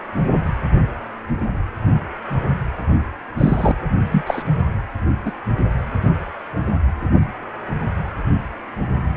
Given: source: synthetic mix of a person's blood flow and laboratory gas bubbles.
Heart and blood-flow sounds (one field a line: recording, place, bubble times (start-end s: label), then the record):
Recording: Doppler ultrasound of blood flow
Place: precordium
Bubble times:
3.38-3.72 s: bubbles
4.11-4.23 s: bubbles
4.27-4.43 s: bubbles
5.25-5.32 s: bubbles
From the record:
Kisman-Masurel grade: 123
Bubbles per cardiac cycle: 1 to 2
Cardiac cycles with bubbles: 10 to 50%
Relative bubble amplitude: loud (0.450 to 0.775)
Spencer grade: 2 (many but less than half of the cardiac periods contain bubble signals, singularly or in groups)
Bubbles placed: anywhere in the cardiac cycle